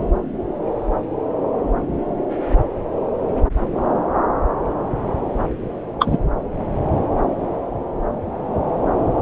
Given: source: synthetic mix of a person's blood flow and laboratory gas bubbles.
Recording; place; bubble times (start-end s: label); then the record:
Doppler ultrasound of blood flow; subclavian vein
6.00-6.17 s: bubbles
From the record:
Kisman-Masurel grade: 123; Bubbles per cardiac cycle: 1 to 2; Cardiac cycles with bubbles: 10 to 50%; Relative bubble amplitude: loud (0.450 to 0.775); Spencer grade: 2 (many but less than half of the cardiac periods contain bubble signals, singularly or in groups); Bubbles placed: anywhere in the cardiac cycle